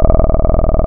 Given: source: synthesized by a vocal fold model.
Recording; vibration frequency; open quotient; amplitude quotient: sustained vowel; 20 Hz; 0.5; 1.3